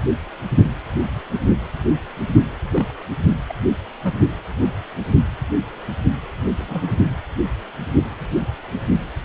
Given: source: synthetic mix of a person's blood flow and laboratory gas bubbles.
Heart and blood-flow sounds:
Doppler ultrasound of blood flow; precordium
2.56-2.92 s: bubbles
3.48-3.53 s: bubbles
4.04-4.12 s: bubbles
6.57-6.93 s: bubbles
From the record:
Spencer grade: 2 (many but less than half of the cardiac periods contain bubble signals, singularly or in groups); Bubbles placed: only in the low amplitude regions of the cardiac cycle

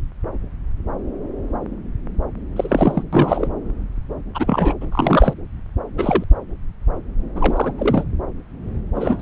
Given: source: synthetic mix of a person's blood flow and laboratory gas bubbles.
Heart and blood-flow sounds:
Doppler ultrasound of blood flow; subclavian vein
2.56-3.03 s: bubbles
3.12-3.48 s: bubbles
4.34-4.75 s: bubbles
4.80-4.85 s: bubbles
4.92-5.33 s: bubbles
5.98-6.24 s: bubbles
7.35-7.72 s: bubbles
7.77-8.04 s: bubbles
8.95-9.22 s: bubbles
From the record:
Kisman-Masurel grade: 222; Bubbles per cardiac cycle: several, 3 to 8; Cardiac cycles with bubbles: 10 to 50%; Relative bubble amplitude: moderate (0.250 to 0.450); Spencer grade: 2 (many but less than half of the cardiac periods contain bubble signals, singularly or in groups); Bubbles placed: anywhere in the cardiac cycle

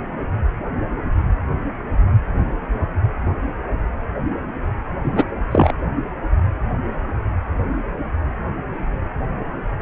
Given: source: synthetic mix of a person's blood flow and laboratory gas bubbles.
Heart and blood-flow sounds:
Doppler ultrasound of blood flow; precordium
5.04-5.12 s: bubbles
5.15-5.25 s: bubbles
5.51-5.72 s: bubbles
From the record:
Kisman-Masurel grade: 213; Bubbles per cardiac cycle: several, 3 to 8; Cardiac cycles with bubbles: 1 to 10%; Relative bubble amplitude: loud (0.450 to 0.775); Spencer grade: 1 (occasional bubble signal discernible with the cardiac motion signal, with majority of cardiac periods free of bubbles); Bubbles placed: anywhere in the cardiac cycle

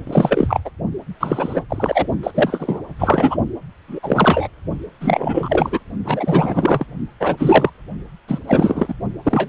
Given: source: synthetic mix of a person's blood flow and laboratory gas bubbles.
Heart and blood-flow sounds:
Doppler ultrasound of blood flow; precordium
0.07-0.60 s: bubbles
0.64-0.70 s: bubbles
1.21-1.64 s: bubbles
1.70-2.07 s: bubbles
2.23-2.31 s: bubbles
2.34-2.79 s: bubbles
2.99-3.37 s: bubbles
3.88-3.99 s: bubbles
4.02-4.47 s: bubbles
5.00-5.79 s: bubbles
6.04-6.85 s: bubbles
7.20-7.70 s: bubbles
8.28-8.40 s: bubbles
8.47-8.94 s: bubbles
9.23-9.49 s: bubbles
From the record:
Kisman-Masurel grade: 343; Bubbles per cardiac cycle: rolling drumbeat, 9 or more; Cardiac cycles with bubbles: 100%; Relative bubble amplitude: loud (0.450 to 0.775); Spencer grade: 3 (all of the cardiac periods contain showers or single bubble signals, but not dominating or overriding the cardiac motion signals); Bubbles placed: only in the low amplitude regions of the cardiac cycle

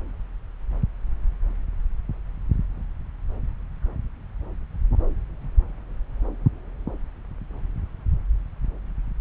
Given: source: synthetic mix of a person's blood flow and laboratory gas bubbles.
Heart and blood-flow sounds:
Doppler ultrasound of blood flow; subclavian vein
no bubbles
From the record:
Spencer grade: 0 (complete lack of bubble signals)

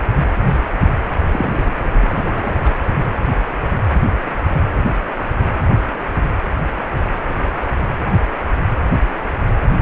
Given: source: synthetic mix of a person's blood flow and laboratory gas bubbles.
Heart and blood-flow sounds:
Doppler ultrasound of blood flow; precordium
1.17-1.24 s: bubbles
1.29-1.70 s: bubbles
1.99-2.74 s: bubbles
From the record:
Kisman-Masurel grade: 211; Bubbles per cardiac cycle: several, 3 to 8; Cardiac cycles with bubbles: 1 to 10%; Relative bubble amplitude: barely perceptible (0.100 to 0.250); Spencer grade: 1 (occasional bubble signal discernible with the cardiac motion signal, with majority of cardiac periods free of bubbles); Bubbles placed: anywhere in the cardiac cycle

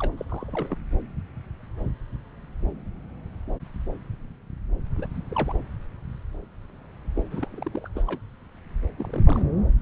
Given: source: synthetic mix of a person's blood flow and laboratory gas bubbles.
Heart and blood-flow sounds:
Doppler ultrasound of blood flow; subclavian vein
0.00-0.12 s: bubbles
0.17-0.25 s: bubbles
0.29-0.76 s: bubbles
4.97-5.06 s: bubbles
5.17-5.21 s: bubbles
5.31-5.53 s: bubbles
7.14-7.23 s: bubbles
7.31-7.88 s: bubbles
7.95-8.03 s: bubbles
8.05-8.19 s: bubbles
8.99-9.42 s: bubbles
From the record:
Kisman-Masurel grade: 221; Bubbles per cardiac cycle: several, 3 to 8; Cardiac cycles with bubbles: 10 to 50%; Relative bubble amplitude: barely perceptible (0.100 to 0.250); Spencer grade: 2 (many but less than half of the cardiac periods contain bubble signals, singularly or in groups); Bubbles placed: anywhere in the cardiac cycle

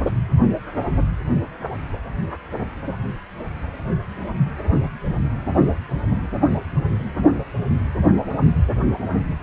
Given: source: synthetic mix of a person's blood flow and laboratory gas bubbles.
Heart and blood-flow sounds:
Doppler ultrasound of blood flow; precordium
no bubbles
From the record:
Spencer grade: 0 (complete lack of bubble signals)

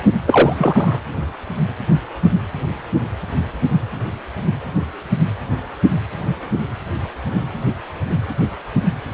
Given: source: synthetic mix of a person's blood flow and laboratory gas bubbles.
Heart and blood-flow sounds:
Doppler ultrasound of blood flow; precordium
0.26-0.54 s: bubbles
0.57-1.00 s: bubbles
From the record:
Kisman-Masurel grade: 213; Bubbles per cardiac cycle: several, 3 to 8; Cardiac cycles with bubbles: 1 to 10%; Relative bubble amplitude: loud (0.450 to 0.775); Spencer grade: 1 (occasional bubble signal discernible with the cardiac motion signal, with majority of cardiac periods free of bubbles); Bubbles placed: only in the low amplitude regions of the cardiac cycle

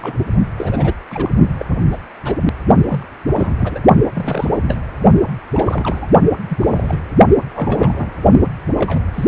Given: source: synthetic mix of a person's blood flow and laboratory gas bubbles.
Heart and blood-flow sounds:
Doppler ultrasound of blood flow; precordium
0.00-0.12 s: bubbles
0.57-0.93 s: bubbles
1.10-1.31 s: bubbles
1.59-1.66 s: bubbles
1.91-1.98 s: bubbles
2.25-2.35 s: bubbles
2.90-3.04 s: bubbles
3.27-3.81 s: bubbles
4.14-4.61 s: bubbles
4.67-4.80 s: bubbles
5.53-6.07 s: bubbles
6.47-6.99 s: bubbles
7.53-8.11 s: bubbles
8.77-9.04 s: bubbles
9.13-9.25 s: bubbles
From the record:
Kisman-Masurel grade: 242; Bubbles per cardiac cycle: several, 3 to 8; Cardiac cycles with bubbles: 100%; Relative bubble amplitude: moderate (0.250 to 0.450); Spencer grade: 3 (all of the cardiac periods contain showers or single bubble signals, but not dominating or overriding the cardiac motion signals); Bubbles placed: only in the low amplitude regions of the cardiac cycle

